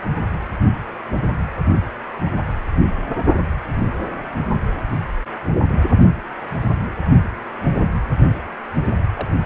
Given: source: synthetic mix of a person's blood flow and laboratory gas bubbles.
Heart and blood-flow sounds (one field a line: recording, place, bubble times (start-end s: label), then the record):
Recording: Doppler ultrasound of blood flow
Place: precordium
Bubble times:
2.25-2.29 s: bubbles
4.89-4.99 s: bubbles
6.61-6.66 s: bubbles
9.14-9.29 s: bubbles
From the record:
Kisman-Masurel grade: 121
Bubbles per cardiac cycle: 1 to 2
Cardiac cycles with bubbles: 10 to 50%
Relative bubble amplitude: barely perceptible (0.100 to 0.250)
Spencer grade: 2 (many but less than half of the cardiac periods contain bubble signals, singularly or in groups)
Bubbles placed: anywhere in the cardiac cycle